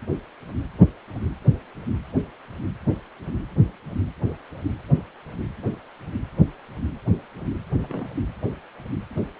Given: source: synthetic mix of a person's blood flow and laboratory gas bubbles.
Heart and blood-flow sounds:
Doppler ultrasound of blood flow; precordium
7.71-8.08 s: bubbles
From the record:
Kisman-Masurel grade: 111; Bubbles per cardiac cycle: 1 to 2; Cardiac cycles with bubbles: 1 to 10%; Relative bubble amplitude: barely perceptible (0.100 to 0.250); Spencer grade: 1 (occasional bubble signal discernible with the cardiac motion signal, with majority of cardiac periods free of bubbles); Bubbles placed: anywhere in the cardiac cycle

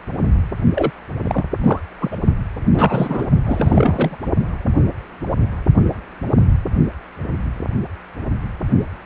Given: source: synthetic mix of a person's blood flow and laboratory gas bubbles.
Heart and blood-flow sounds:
Doppler ultrasound of blood flow; precordium
0.75-0.91 s: bubbles
1.25-1.45 s: bubbles
1.60-1.79 s: bubbles
2.00-2.18 s: bubbles
2.73-3.25 s: bubbles
3.44-4.16 s: bubbles
From the record:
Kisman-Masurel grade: 332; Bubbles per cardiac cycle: rolling drumbeat, 9 or more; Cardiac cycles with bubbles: 50 to 99%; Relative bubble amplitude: moderate (0.250 to 0.450); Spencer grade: 3 (all of the cardiac periods contain showers or single bubble signals, but not dominating or overriding the cardiac motion signals); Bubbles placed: only in the low amplitude regions of the cardiac cycle

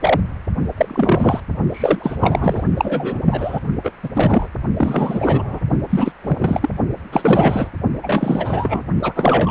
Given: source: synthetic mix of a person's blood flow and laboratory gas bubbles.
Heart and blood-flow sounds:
Doppler ultrasound of blood flow; precordium
0.00-0.20 s: bubbles
0.77-1.41 s: bubbles
1.71-2.17 s: bubbles
2.20-2.64 s: bubbles
2.77-3.20 s: bubbles
3.25-3.60 s: bubbles
3.84-3.92 s: bubbles
4.03-4.09 s: bubbles
4.15-4.49 s: bubbles
4.77-5.60 s: bubbles
5.89-6.12 s: bubbles
6.23-6.70 s: bubbles
7.12-7.71 s: bubbles
8.03-8.80 s: bubbles
9.02-9.51 s: bubbles
From the record:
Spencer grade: 3 (all of the cardiac periods contain showers or single bubble signals, but not dominating or overriding the cardiac motion signals); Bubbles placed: only in the low amplitude regions of the cardiac cycle

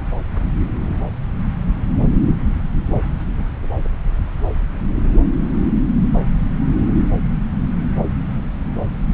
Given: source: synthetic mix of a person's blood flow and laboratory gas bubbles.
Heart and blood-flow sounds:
Doppler ultrasound of blood flow; subclavian vein
no bubbles
From the record:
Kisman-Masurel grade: 000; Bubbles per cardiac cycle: 0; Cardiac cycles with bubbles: 0%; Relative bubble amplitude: no bubbles discernible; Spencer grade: 0 (complete lack of bubble signals)

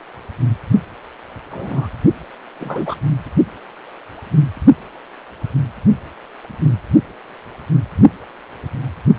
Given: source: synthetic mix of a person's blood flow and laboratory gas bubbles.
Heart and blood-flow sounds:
Doppler ultrasound of blood flow; precordium
1.50-1.89 s: bubbles
2.59-2.96 s: bubbles
From the record:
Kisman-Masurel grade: 122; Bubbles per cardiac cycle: 1 to 2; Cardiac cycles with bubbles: 10 to 50%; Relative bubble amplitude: moderate (0.250 to 0.450); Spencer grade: 2 (many but less than half of the cardiac periods contain bubble signals, singularly or in groups); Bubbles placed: only in the low amplitude regions of the cardiac cycle

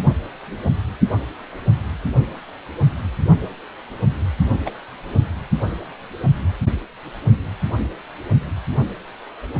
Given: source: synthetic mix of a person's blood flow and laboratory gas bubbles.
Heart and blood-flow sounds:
Doppler ultrasound of blood flow; precordium
4.66-4.70 s: bubbles
From the record:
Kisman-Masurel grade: 112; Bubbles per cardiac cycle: 1 to 2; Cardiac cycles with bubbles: 1 to 10%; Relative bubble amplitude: moderate (0.250 to 0.450); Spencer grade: 1 (occasional bubble signal discernible with the cardiac motion signal, with majority of cardiac periods free of bubbles); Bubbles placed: anywhere in the cardiac cycle

